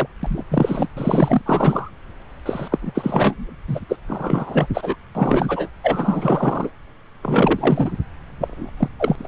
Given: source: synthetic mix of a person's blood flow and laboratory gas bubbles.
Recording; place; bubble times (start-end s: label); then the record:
Doppler ultrasound of blood flow; subclavian vein
0.00-0.07 s: bubbles
0.23-0.44 s: bubbles
0.51-0.88 s: bubbles
0.96-1.42 s: bubbles
1.46-1.90 s: bubbles
2.46-2.68 s: bubbles
2.72-2.78 s: bubbles
2.82-2.92 s: bubbles
2.94-3.55 s: bubbles
3.68-3.80 s: bubbles
3.89-3.96 s: bubbles
4.08-4.66 s: bubbles
4.74-4.96 s: bubbles
5.15-5.68 s: bubbles
5.83-6.70 s: bubbles
7.23-7.92 s: bubbles
8.41-8.71 s: bubbles
8.77-8.88 s: bubbles
8.99-9.28 s: bubbles
From the record:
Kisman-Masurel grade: 342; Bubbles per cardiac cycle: rolling drumbeat, 9 or more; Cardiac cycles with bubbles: 100%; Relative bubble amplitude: moderate (0.250 to 0.450); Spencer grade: 3 (all of the cardiac periods contain showers or single bubble signals, but not dominating or overriding the cardiac motion signals); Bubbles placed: anywhere in the cardiac cycle